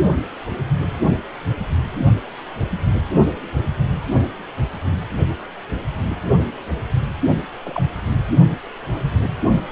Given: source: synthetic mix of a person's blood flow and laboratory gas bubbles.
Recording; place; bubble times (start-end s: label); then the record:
Doppler ultrasound of blood flow; precordium
7.63-7.83 s: bubbles
From the record:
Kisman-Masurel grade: 111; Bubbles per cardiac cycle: 1 to 2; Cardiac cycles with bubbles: 1 to 10%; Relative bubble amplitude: barely perceptible (0.100 to 0.250); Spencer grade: 1 (occasional bubble signal discernible with the cardiac motion signal, with majority of cardiac periods free of bubbles); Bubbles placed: only in the low amplitude regions of the cardiac cycle